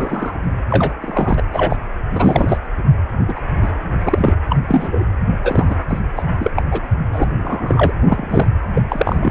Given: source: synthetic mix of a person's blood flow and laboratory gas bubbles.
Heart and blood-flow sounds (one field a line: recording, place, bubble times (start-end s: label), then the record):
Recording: Doppler ultrasound of blood flow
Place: precordium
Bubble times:
0.00-0.36 s: bubbles
0.70-0.94 s: bubbles
1.01-1.34 s: bubbles
1.37-1.43 s: bubbles
1.53-1.76 s: bubbles
2.09-2.57 s: bubbles
3.28-3.40 s: bubbles
3.62-3.71 s: bubbles
4.05-4.36 s: bubbles
4.50-4.56 s: bubbles
4.67-5.04 s: bubbles
5.42-5.75 s: bubbles
5.88-6.01 s: bubbles
6.16-6.23 s: bubbles
6.39-6.50 s: bubbles
6.56-6.62 s: bubbles
6.71-6.81 s: bubbles
7.12-7.24 s: bubbles
7.38-7.93 s: bubbles
8.09-8.46 s: bubbles
8.74-8.82 s: bubbles
8.90-9.31 s: bubbles
From the record:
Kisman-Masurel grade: 243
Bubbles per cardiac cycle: several, 3 to 8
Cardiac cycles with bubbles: 100%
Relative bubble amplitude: loud (0.450 to 0.775)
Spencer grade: 3 (all of the cardiac periods contain showers or single bubble signals, but not dominating or overriding the cardiac motion signals)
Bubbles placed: anywhere in the cardiac cycle